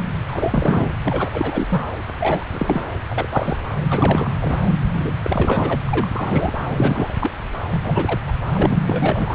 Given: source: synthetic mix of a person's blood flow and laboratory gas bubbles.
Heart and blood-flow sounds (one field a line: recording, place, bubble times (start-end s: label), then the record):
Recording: Doppler ultrasound of blood flow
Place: subclavian vein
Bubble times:
0.27-0.88 s: bubbles
1.04-1.29 s: bubbles
1.32-1.83 s: bubbles
2.20-2.44 s: bubbles
2.51-2.83 s: bubbles
3.09-3.27 s: bubbles
3.33-3.56 s: bubbles
3.90-4.38 s: bubbles
4.41-4.58 s: bubbles
4.93-5.13 s: bubbles
5.24-5.79 s: bubbles
5.85-6.10 s: bubbles
6.15-6.52 s: bubbles
6.70-7.17 s: bubbles
7.21-7.30 s: bubbles
7.70-8.20 s: bubbles
8.26-8.33 s: bubbles
8.52-8.85 s: bubbles
8.87-9.35 s: bubbles
From the record:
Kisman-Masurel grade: 333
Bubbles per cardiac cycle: rolling drumbeat, 9 or more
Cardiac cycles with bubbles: 50 to 99%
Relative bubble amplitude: loud (0.450 to 0.775)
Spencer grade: 3 (all of the cardiac periods contain showers or single bubble signals, but not dominating or overriding the cardiac motion signals)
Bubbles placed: anywhere in the cardiac cycle